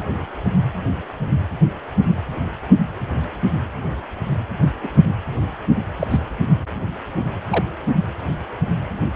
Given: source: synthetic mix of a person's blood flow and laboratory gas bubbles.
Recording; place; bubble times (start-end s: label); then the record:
Doppler ultrasound of blood flow; precordium
4.83-4.88 s: bubbles
5.99-6.07 s: bubbles
6.10-6.19 s: bubbles
7.49-7.65 s: bubbles
From the record:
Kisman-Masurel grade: 122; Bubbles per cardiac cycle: 1 to 2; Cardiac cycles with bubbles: 10 to 50%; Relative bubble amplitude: moderate (0.250 to 0.450); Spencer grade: 2 (many but less than half of the cardiac periods contain bubble signals, singularly or in groups); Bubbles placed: anywhere in the cardiac cycle